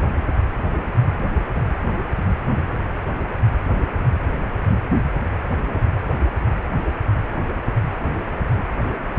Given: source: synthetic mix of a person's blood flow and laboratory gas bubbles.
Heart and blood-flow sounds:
Doppler ultrasound of blood flow; precordium
8.82-8.88 s: bubbles
From the record:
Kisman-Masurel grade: 111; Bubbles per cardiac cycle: 1 to 2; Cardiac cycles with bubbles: 1 to 10%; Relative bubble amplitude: barely perceptible (0.100 to 0.250); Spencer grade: 1 (occasional bubble signal discernible with the cardiac motion signal, with majority of cardiac periods free of bubbles); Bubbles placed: only in the low amplitude regions of the cardiac cycle

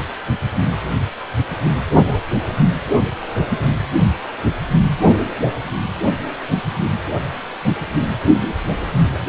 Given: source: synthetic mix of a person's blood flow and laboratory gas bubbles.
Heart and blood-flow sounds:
Doppler ultrasound of blood flow; precordium
2.04-2.23 s: bubbles
2.85-2.90 s: bubbles
5.48-5.68 s: bubbles
9.12-9.19 s: bubbles
From the record:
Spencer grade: 2 (many but less than half of the cardiac periods contain bubble signals, singularly or in groups); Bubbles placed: anywhere in the cardiac cycle

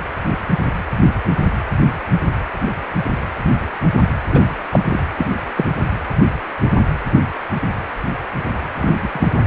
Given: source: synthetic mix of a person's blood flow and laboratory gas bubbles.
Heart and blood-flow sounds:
Doppler ultrasound of blood flow; precordium
4.31-4.42 s: bubbles
4.71-5.03 s: bubbles
5.18-5.28 s: bubbles
5.55-5.65 s: bubbles
8.75-9.40 s: bubbles
From the record:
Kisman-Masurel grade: 122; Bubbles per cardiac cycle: 1 to 2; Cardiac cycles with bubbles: 10 to 50%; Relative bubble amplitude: moderate (0.250 to 0.450); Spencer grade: 2 (many but less than half of the cardiac periods contain bubble signals, singularly or in groups); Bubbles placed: anywhere in the cardiac cycle

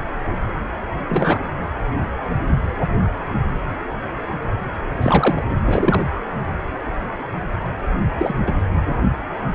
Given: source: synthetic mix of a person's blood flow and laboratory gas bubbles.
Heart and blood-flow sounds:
Doppler ultrasound of blood flow; precordium
1.08-1.40 s: bubbles
5.01-5.42 s: bubbles
5.65-6.05 s: bubbles
8.18-8.34 s: bubbles
8.46-8.53 s: bubbles
From the record:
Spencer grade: 2 (many but less than half of the cardiac periods contain bubble signals, singularly or in groups); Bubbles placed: anywhere in the cardiac cycle

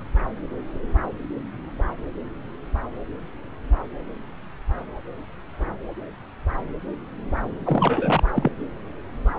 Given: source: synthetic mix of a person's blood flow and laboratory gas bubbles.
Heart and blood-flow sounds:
Doppler ultrasound of blood flow; subclavian vein
7.66-8.23 s: bubbles
8.36-8.51 s: bubbles
From the record:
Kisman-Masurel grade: 212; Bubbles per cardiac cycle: several, 3 to 8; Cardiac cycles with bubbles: 1 to 10%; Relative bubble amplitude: moderate (0.250 to 0.450); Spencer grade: 1 (occasional bubble signal discernible with the cardiac motion signal, with majority of cardiac periods free of bubbles); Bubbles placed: anywhere in the cardiac cycle

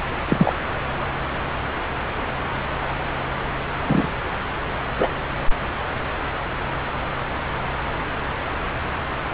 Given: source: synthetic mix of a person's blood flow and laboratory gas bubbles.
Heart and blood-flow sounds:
Doppler ultrasound of blood flow; subclavian vein
0.28-0.53 s: bubbles
3.85-4.08 s: bubbles
4.98-5.09 s: bubbles
From the record:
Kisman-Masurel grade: 123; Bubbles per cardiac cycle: 1 to 2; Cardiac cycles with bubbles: 10 to 50%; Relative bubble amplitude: loud (0.450 to 0.775); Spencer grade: 2 (many but less than half of the cardiac periods contain bubble signals, singularly or in groups); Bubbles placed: anywhere in the cardiac cycle

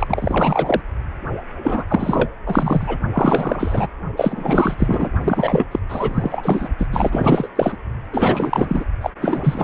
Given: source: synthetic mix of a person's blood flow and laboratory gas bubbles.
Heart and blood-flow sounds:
Doppler ultrasound of blood flow; precordium
0.00-0.80 s: bubbles
1.62-1.84 s: bubbles
1.88-2.29 s: bubbles
2.46-2.98 s: bubbles
3.13-3.88 s: bubbles
4.17-5.11 s: bubbles
5.21-5.65 s: bubbles
5.71-5.80 s: bubbles
5.89-6.69 s: bubbles
6.78-6.87 s: bubbles
6.91-7.48 s: bubbles
7.55-7.77 s: bubbles
8.12-8.85 s: bubbles
9.01-9.10 s: bubbles
9.21-9.64 s: bubbles
From the record:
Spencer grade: 4 (maximum detectable bubble signal sounding continuously throughout systole and diastole of every cardiac period, and overriding the amplitude of the normal cardiac signals); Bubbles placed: only in the low amplitude regions of the cardiac cycle

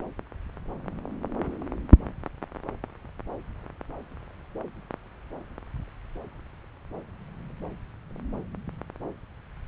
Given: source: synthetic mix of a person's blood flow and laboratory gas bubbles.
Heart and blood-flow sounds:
Doppler ultrasound of blood flow; subclavian vein
no bubbles
From the record:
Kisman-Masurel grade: 000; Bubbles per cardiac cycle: 0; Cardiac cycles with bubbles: 0%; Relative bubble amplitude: no bubbles discernible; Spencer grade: 0 (complete lack of bubble signals)

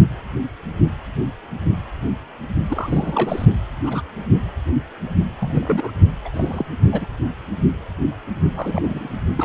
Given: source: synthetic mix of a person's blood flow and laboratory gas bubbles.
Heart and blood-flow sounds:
Doppler ultrasound of blood flow; precordium
2.65-3.46 s: bubbles
3.83-4.04 s: bubbles
5.40-5.91 s: bubbles
6.24-6.29 s: bubbles
6.33-6.65 s: bubbles
6.92-7.07 s: bubbles
8.55-9.13 s: bubbles
9.37-9.45 s: bubbles
From the record:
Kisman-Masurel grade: 232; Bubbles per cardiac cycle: several, 3 to 8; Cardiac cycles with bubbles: 50 to 99%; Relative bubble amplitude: moderate (0.250 to 0.450); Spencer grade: 3 (all of the cardiac periods contain showers or single bubble signals, but not dominating or overriding the cardiac motion signals); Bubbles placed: only in the low amplitude regions of the cardiac cycle

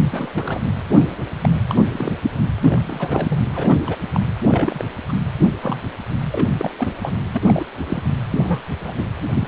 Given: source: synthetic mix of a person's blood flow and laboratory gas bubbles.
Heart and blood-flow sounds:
Doppler ultrasound of blood flow; precordium
0.00-0.09 s: bubbles
0.11-0.32 s: bubbles
0.34-0.60 s: bubbles
0.89-1.15 s: bubbles
1.43-1.48 s: bubbles
1.68-1.86 s: bubbles
1.91-2.15 s: bubbles
2.61-3.40 s: bubbles
3.54-3.75 s: bubbles
3.87-3.96 s: bubbles
4.14-4.20 s: bubbles
4.45-4.84 s: bubbles
5.08-5.12 s: bubbles
5.62-5.82 s: bubbles
6.32-6.45 s: bubbles
6.58-6.93 s: bubbles
7.03-7.19 s: bubbles
7.33-7.42 s: bubbles
7.46-7.64 s: bubbles
7.87-8.03 s: bubbles
8.30-8.63 s: bubbles
8.85-8.94 s: bubbles
8.97-9.07 s: bubbles
9.35-9.48 s: bubbles
From the record:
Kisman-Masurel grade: 242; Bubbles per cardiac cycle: several, 3 to 8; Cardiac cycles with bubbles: 100%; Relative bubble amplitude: moderate (0.250 to 0.450); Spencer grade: 3 (all of the cardiac periods contain showers or single bubble signals, but not dominating or overriding the cardiac motion signals); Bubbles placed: anywhere in the cardiac cycle

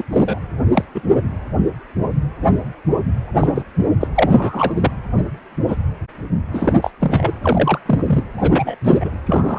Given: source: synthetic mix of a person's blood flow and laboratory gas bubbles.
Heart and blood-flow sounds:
Doppler ultrasound of blood flow; precordium
0.00-0.03 s: bubbles
0.11-0.40 s: bubbles
0.74-0.84 s: bubbles
0.95-1.02 s: bubbles
3.40-3.64 s: bubbles
4.00-4.07 s: bubbles
4.14-4.91 s: bubbles
5.68-5.77 s: bubbles
6.53-6.90 s: bubbles
6.99-7.32 s: bubbles
7.42-7.79 s: bubbles
7.86-8.23 s: bubbles
8.37-8.75 s: bubbles
8.84-9.11 s: bubbles
9.26-9.59 s: bubbles
From the record:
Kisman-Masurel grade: 233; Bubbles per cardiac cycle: several, 3 to 8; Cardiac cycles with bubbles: 50 to 99%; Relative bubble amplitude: loud (0.450 to 0.775); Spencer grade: 3 (all of the cardiac periods contain showers or single bubble signals, but not dominating or overriding the cardiac motion signals); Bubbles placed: anywhere in the cardiac cycle

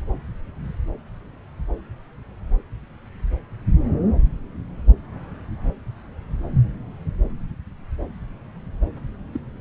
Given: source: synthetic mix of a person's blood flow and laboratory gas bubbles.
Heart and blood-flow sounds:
Doppler ultrasound of blood flow; subclavian vein
9.33-9.40 s: bubbles
From the record:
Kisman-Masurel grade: 111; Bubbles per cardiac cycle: 1 to 2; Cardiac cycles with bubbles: 1 to 10%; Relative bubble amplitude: barely perceptible (0.100 to 0.250); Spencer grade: 1 (occasional bubble signal discernible with the cardiac motion signal, with majority of cardiac periods free of bubbles); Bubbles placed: anywhere in the cardiac cycle

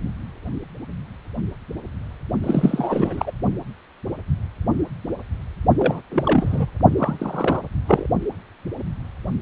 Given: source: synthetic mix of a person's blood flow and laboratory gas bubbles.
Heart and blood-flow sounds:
Doppler ultrasound of blood flow; precordium
2.43-3.32 s: bubbles
5.79-6.01 s: bubbles
6.12-6.70 s: bubbles
6.97-7.61 s: bubbles
7.86-8.07 s: bubbles
From the record:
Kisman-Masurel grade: 222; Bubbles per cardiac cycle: several, 3 to 8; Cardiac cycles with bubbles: 10 to 50%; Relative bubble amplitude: moderate (0.250 to 0.450); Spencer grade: 2 (many but less than half of the cardiac periods contain bubble signals, singularly or in groups); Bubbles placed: only in the low amplitude regions of the cardiac cycle

